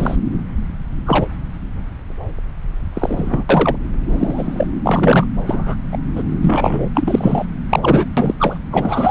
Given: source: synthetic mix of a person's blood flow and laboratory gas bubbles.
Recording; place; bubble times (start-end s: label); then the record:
Doppler ultrasound of blood flow; subclavian vein
0.00-0.16 s: bubbles
1.05-1.27 s: bubbles
2.94-3.46 s: bubbles
3.49-3.76 s: bubbles
4.09-4.67 s: bubbles
4.83-5.27 s: bubbles
5.46-5.76 s: bubbles
5.91-5.98 s: bubbles
6.15-6.22 s: bubbles
6.41-6.88 s: bubbles
6.94-7.46 s: bubbles
7.69-8.05 s: bubbles
8.17-8.34 s: bubbles
8.38-8.59 s: bubbles
8.71-9.11 s: bubbles
From the record:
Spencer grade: 3 (all of the cardiac periods contain showers or single bubble signals, but not dominating or overriding the cardiac motion signals); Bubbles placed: anywhere in the cardiac cycle